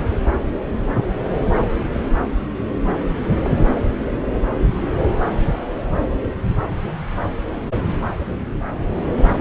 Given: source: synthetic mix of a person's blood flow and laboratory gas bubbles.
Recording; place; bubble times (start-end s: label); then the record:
Doppler ultrasound of blood flow; subclavian vein
3.42-3.50 s: bubbles
From the record:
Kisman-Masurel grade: 111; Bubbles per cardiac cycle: 1 to 2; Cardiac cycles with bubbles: 1 to 10%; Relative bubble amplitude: barely perceptible (0.100 to 0.250); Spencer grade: 1 (occasional bubble signal discernible with the cardiac motion signal, with majority of cardiac periods free of bubbles); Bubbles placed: anywhere in the cardiac cycle